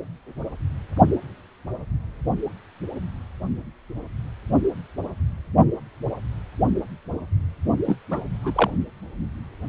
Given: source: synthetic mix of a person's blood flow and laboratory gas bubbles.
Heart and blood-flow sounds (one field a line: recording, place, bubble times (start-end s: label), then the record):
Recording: Doppler ultrasound of blood flow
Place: precordium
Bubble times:
7.85-7.96 s: bubbles
8.11-8.22 s: bubbles
8.43-8.71 s: bubbles
From the record:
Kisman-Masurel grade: 222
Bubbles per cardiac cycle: several, 3 to 8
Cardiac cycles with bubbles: 10 to 50%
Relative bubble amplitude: moderate (0.250 to 0.450)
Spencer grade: 2 (many but less than half of the cardiac periods contain bubble signals, singularly or in groups)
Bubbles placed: only in the low amplitude regions of the cardiac cycle